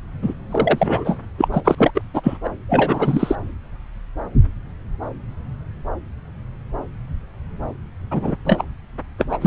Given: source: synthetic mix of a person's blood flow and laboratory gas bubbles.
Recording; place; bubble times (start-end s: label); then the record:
Doppler ultrasound of blood flow; subclavian vein
0.22-0.33 s: bubbles
0.51-1.17 s: bubbles
1.38-1.48 s: bubbles
1.52-1.60 s: bubbles
1.65-1.75 s: bubbles
1.77-1.90 s: bubbles
1.94-2.01 s: bubbles
2.13-2.38 s: bubbles
2.44-2.50 s: bubbles
2.69-3.35 s: bubbles
8.10-8.36 s: bubbles
8.45-8.64 s: bubbles
9.18-9.25 s: bubbles
9.29-9.38 s: bubbles
9.41-9.47 s: bubbles
From the record:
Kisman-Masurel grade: 333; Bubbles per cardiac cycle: rolling drumbeat, 9 or more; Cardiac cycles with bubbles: 50 to 99%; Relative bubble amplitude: loud (0.450 to 0.775); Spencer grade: 3 (all of the cardiac periods contain showers or single bubble signals, but not dominating or overriding the cardiac motion signals); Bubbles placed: anywhere in the cardiac cycle